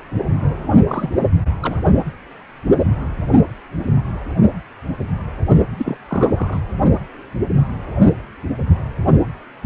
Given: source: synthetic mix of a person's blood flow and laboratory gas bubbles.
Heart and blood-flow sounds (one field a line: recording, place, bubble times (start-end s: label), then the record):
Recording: Doppler ultrasound of blood flow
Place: precordium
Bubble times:
0.87-1.10 s: bubbles
1.17-1.30 s: bubbles
1.61-1.77 s: bubbles
5.78-5.98 s: bubbles
6.08-6.60 s: bubbles
From the record:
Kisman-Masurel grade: 222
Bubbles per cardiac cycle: several, 3 to 8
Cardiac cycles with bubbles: 10 to 50%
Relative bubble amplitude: moderate (0.250 to 0.450)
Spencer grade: 2 (many but less than half of the cardiac periods contain bubble signals, singularly or in groups)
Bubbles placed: only in the low amplitude regions of the cardiac cycle